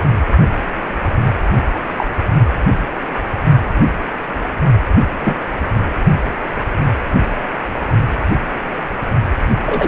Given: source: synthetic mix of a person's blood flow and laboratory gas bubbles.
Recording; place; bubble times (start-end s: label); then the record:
Doppler ultrasound of blood flow; precordium
1.96-2.06 s: bubbles
5.21-5.35 s: bubbles
9.66-9.88 s: bubbles
From the record:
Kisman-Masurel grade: 122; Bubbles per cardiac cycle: 1 to 2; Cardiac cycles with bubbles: 10 to 50%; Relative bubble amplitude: moderate (0.250 to 0.450); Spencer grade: 2 (many but less than half of the cardiac periods contain bubble signals, singularly or in groups); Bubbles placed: only in the low amplitude regions of the cardiac cycle